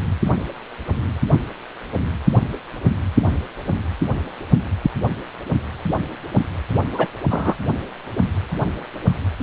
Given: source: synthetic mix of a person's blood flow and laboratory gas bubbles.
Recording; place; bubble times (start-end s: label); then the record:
Doppler ultrasound of blood flow; precordium
6.92-7.08 s: bubbles
7.30-7.54 s: bubbles
From the record:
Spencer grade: 1 (occasional bubble signal discernible with the cardiac motion signal, with majority of cardiac periods free of bubbles); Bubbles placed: anywhere in the cardiac cycle